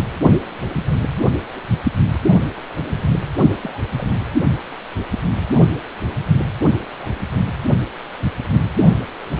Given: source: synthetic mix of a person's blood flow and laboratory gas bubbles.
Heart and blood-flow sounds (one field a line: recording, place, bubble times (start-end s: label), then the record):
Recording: Doppler ultrasound of blood flow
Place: precordium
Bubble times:
1.19-1.31 s: bubbles
1.49-1.63 s: bubbles
3.62-3.83 s: bubbles
3.96-4.09 s: bubbles
6.92-7.13 s: bubbles
From the record:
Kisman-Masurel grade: 121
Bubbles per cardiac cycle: 1 to 2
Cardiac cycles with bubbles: 10 to 50%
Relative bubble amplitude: barely perceptible (0.100 to 0.250)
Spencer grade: 2 (many but less than half of the cardiac periods contain bubble signals, singularly or in groups)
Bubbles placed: anywhere in the cardiac cycle